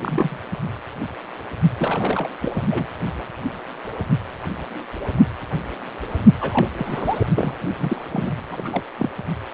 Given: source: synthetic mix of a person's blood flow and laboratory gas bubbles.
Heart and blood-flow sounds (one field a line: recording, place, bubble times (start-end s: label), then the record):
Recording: Doppler ultrasound of blood flow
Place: precordium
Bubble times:
0.01-0.37 s: bubbles
1.78-2.30 s: bubbles
2.41-2.52 s: bubbles
2.54-2.64 s: bubbles
2.70-2.86 s: bubbles
6.40-6.68 s: bubbles
6.77-7.26 s: bubbles
7.35-7.57 s: bubbles
7.78-8.04 s: bubbles
8.11-8.32 s: bubbles
8.50-8.83 s: bubbles
8.98-9.09 s: bubbles
From the record:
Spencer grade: 3 (all of the cardiac periods contain showers or single bubble signals, but not dominating or overriding the cardiac motion signals)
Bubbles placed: only in the low amplitude regions of the cardiac cycle